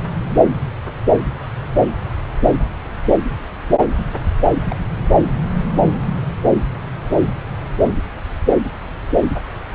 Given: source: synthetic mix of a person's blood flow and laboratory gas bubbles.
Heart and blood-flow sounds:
Doppler ultrasound of blood flow; subclavian vein
0.24-0.42 s: bubbles
4.70-4.76 s: bubbles
From the record:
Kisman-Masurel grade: 121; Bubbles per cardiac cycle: 1 to 2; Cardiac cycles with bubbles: 10 to 50%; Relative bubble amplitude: barely perceptible (0.100 to 0.250); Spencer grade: 2 (many but less than half of the cardiac periods contain bubble signals, singularly or in groups); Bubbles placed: anywhere in the cardiac cycle

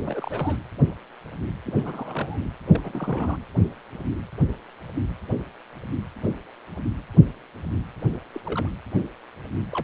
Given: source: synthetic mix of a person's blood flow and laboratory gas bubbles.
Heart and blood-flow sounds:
Doppler ultrasound of blood flow; precordium
0.00-0.56 s: bubbles
1.66-1.73 s: bubbles
1.76-2.48 s: bubbles
2.71-3.39 s: bubbles
8.34-8.41 s: bubbles
8.44-8.69 s: bubbles
9.72-9.84 s: bubbles
From the record:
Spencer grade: 2 (many but less than half of the cardiac periods contain bubble signals, singularly or in groups); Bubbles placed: anywhere in the cardiac cycle

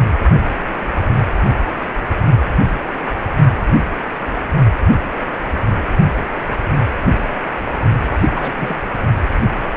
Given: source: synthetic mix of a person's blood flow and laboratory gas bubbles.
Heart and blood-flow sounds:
Doppler ultrasound of blood flow; precordium
8.10-8.54 s: bubbles
8.56-8.76 s: bubbles
From the record:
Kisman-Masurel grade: 221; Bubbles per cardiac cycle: several, 3 to 8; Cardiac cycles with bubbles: 10 to 50%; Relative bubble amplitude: barely perceptible (0.100 to 0.250); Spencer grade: 2 (many but less than half of the cardiac periods contain bubble signals, singularly or in groups); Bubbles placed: only in the low amplitude regions of the cardiac cycle

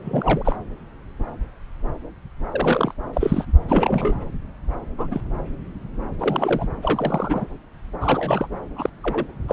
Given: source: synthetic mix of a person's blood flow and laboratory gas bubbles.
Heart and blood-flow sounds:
Doppler ultrasound of blood flow; subclavian vein
0.04-0.56 s: bubbles
2.51-2.94 s: bubbles
3.13-3.45 s: bubbles
3.68-4.15 s: bubbles
4.97-5.08 s: bubbles
5.10-5.21 s: bubbles
6.19-6.67 s: bubbles
6.81-7.46 s: bubbles
8.01-8.47 s: bubbles
8.76-8.90 s: bubbles
9.03-9.26 s: bubbles
9.48-9.53 s: bubbles
From the record:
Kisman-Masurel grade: 233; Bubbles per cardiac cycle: several, 3 to 8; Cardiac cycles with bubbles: 50 to 99%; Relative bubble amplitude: loud (0.450 to 0.775); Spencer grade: 3 (all of the cardiac periods contain showers or single bubble signals, but not dominating or overriding the cardiac motion signals); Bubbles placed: anywhere in the cardiac cycle

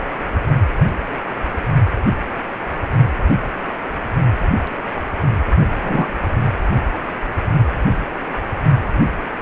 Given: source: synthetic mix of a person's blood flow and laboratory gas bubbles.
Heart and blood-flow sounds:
Doppler ultrasound of blood flow; precordium
5.81-6.07 s: bubbles
From the record:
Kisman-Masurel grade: 123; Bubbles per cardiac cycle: 1 to 2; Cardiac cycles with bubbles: 10 to 50%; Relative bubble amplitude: loud (0.450 to 0.775); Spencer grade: 2 (many but less than half of the cardiac periods contain bubble signals, singularly or in groups); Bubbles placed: only in the low amplitude regions of the cardiac cycle

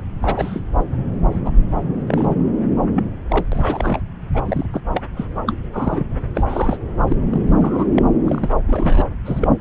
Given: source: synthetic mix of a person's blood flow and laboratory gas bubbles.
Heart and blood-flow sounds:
Doppler ultrasound of blood flow; subclavian vein
0.00-0.04 s: bubbles
0.22-0.60 s: bubbles
0.78-0.83 s: bubbles
1.31-1.40 s: bubbles
1.44-1.50 s: bubbles
2.07-2.29 s: bubbles
2.95-3.04 s: bubbles
3.30-3.44 s: bubbles
3.52-3.99 s: bubbles
4.34-4.66 s: bubbles
4.73-4.81 s: bubbles
4.92-5.01 s: bubbles
5.17-5.25 s: bubbles
5.47-5.53 s: bubbles
5.73-6.07 s: bubbles
6.35-6.77 s: bubbles
7.08-7.16 s: bubbles
7.30-7.41 s: bubbles
7.46-7.55 s: bubbles
7.61-7.85 s: bubbles
7.96-8.03 s: bubbles
8.26-8.49 s: bubbles
8.67-9.04 s: bubbles
9.25-9.48 s: bubbles
From the record:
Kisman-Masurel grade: 242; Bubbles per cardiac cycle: several, 3 to 8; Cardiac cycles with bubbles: 100%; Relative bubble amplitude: moderate (0.250 to 0.450); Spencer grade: 3 (all of the cardiac periods contain showers or single bubble signals, but not dominating or overriding the cardiac motion signals); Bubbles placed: anywhere in the cardiac cycle

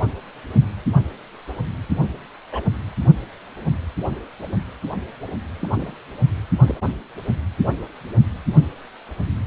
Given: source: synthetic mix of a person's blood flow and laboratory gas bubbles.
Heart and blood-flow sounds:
Doppler ultrasound of blood flow; precordium
2.52-2.62 s: bubbles
5.59-5.93 s: bubbles
6.67-6.75 s: bubbles
From the record:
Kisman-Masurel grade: 121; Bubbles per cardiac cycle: 1 to 2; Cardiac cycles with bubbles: 10 to 50%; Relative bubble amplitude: barely perceptible (0.100 to 0.250); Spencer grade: 2 (many but less than half of the cardiac periods contain bubble signals, singularly or in groups); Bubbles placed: anywhere in the cardiac cycle

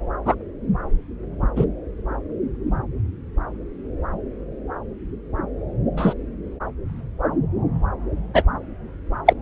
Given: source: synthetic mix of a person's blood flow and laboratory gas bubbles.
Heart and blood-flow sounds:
Doppler ultrasound of blood flow; subclavian vein
0.25-0.34 s: bubbles
1.56-1.65 s: bubbles
5.97-6.14 s: bubbles
8.34-8.43 s: bubbles
9.26-9.33 s: bubbles
From the record:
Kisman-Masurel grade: 123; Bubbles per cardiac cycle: 1 to 2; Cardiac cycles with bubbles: 10 to 50%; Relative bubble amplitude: loud (0.450 to 0.775); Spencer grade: 2 (many but less than half of the cardiac periods contain bubble signals, singularly or in groups); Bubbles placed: anywhere in the cardiac cycle

